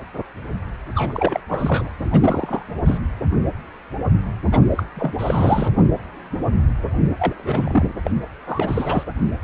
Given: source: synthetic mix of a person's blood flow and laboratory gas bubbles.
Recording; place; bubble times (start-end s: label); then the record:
Doppler ultrasound of blood flow; precordium
0.95-1.40 s: bubbles
1.49-1.90 s: bubbles
1.99-2.62 s: bubbles
2.86-2.98 s: bubbles
4.51-4.60 s: bubbles
4.70-4.83 s: bubbles
4.96-5.13 s: bubbles
5.18-5.68 s: bubbles
7.19-7.84 s: bubbles
8.03-8.11 s: bubbles
8.47-9.04 s: bubbles
From the record:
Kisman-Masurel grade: 222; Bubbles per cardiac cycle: several, 3 to 8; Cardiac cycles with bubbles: 10 to 50%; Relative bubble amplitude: moderate (0.250 to 0.450); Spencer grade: 2 (many but less than half of the cardiac periods contain bubble signals, singularly or in groups); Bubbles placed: anywhere in the cardiac cycle